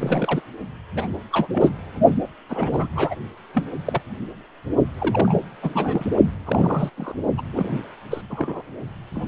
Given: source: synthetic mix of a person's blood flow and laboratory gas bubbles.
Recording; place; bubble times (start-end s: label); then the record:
Doppler ultrasound of blood flow; precordium
0.00-0.42 s: bubbles
0.95-1.08 s: bubbles
1.32-1.47 s: bubbles
1.52-1.69 s: bubbles
2.49-2.87 s: bubbles
2.95-3.15 s: bubbles
3.54-3.65 s: bubbles
3.85-4.01 s: bubbles
4.99-5.40 s: bubbles
5.62-6.06 s: bubbles
6.46-6.90 s: bubbles
6.97-7.15 s: bubbles
7.37-7.42 s: bubbles
7.53-7.83 s: bubbles
8.10-8.21 s: bubbles
8.30-8.62 s: bubbles
9.14-9.28 s: bubbles
From the record:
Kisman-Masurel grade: 242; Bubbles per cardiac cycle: several, 3 to 8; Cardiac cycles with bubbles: 100%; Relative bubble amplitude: moderate (0.250 to 0.450); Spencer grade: 3 (all of the cardiac periods contain showers or single bubble signals, but not dominating or overriding the cardiac motion signals); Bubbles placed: only in the low amplitude regions of the cardiac cycle